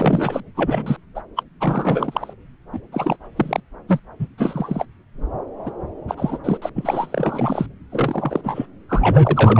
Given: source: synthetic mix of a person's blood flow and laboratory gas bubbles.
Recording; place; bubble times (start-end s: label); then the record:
Doppler ultrasound of blood flow; subclavian vein
0.00-0.44 s: bubbles
0.55-0.96 s: bubbles
1.15-1.22 s: bubbles
1.36-1.43 s: bubbles
1.60-2.33 s: bubbles
2.73-2.79 s: bubbles
2.92-3.17 s: bubbles
3.36-3.60 s: bubbles
3.87-3.99 s: bubbles
4.19-4.28 s: bubbles
4.38-4.86 s: bubbles
5.65-5.71 s: bubbles
6.08-6.39 s: bubbles
6.44-6.58 s: bubbles
6.62-6.70 s: bubbles
6.75-7.67 s: bubbles
7.92-8.41 s: bubbles
8.43-8.67 s: bubbles
8.88-9.60 s: bubbles
From the record:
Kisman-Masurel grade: 332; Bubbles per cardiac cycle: rolling drumbeat, 9 or more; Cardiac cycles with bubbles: 50 to 99%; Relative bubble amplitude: moderate (0.250 to 0.450); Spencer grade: 3 (all of the cardiac periods contain showers or single bubble signals, but not dominating or overriding the cardiac motion signals); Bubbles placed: anywhere in the cardiac cycle